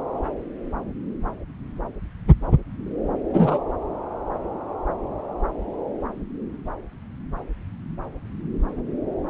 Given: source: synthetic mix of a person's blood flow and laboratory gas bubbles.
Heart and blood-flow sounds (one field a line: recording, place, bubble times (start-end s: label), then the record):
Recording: Doppler ultrasound of blood flow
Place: subclavian vein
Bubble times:
3.33-3.59 s: bubbles
From the record:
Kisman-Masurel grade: 113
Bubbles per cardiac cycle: 1 to 2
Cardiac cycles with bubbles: 1 to 10%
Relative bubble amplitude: loud (0.450 to 0.775)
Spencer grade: 1 (occasional bubble signal discernible with the cardiac motion signal, with majority of cardiac periods free of bubbles)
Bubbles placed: anywhere in the cardiac cycle